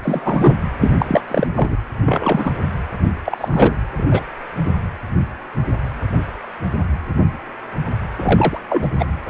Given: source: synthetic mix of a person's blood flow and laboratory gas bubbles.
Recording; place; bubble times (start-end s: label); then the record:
Doppler ultrasound of blood flow; precordium
0.00-0.56 s: bubbles
0.80-0.92 s: bubbles
0.98-1.22 s: bubbles
1.28-1.47 s: bubbles
1.55-1.77 s: bubbles
2.05-2.52 s: bubbles
3.25-3.77 s: bubbles
3.97-4.20 s: bubbles
4.65-4.71 s: bubbles
8.17-8.59 s: bubbles
8.69-8.88 s: bubbles
8.99-9.06 s: bubbles
From the record:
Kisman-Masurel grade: 233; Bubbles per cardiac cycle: several, 3 to 8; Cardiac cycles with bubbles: 50 to 99%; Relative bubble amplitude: loud (0.450 to 0.775); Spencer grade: 3 (all of the cardiac periods contain showers or single bubble signals, but not dominating or overriding the cardiac motion signals); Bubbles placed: anywhere in the cardiac cycle